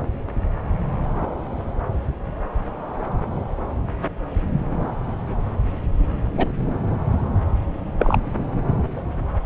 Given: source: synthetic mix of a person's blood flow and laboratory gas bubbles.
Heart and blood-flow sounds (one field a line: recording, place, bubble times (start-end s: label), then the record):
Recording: Doppler ultrasound of blood flow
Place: subclavian vein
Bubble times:
6.38-6.48 s: bubbles
7.99-8.17 s: bubbles
From the record:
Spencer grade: 2 (many but less than half of the cardiac periods contain bubble signals, singularly or in groups)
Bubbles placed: anywhere in the cardiac cycle